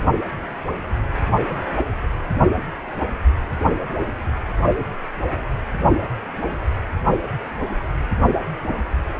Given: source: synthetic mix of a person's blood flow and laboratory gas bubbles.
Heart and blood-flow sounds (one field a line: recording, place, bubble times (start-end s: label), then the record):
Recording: Doppler ultrasound of blood flow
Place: precordium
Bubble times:
0.00-0.04 s: bubbles
From the record:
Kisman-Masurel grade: 211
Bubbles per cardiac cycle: several, 3 to 8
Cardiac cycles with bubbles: 1 to 10%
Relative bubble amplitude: barely perceptible (0.100 to 0.250)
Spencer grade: 1 (occasional bubble signal discernible with the cardiac motion signal, with majority of cardiac periods free of bubbles)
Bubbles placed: only in the low amplitude regions of the cardiac cycle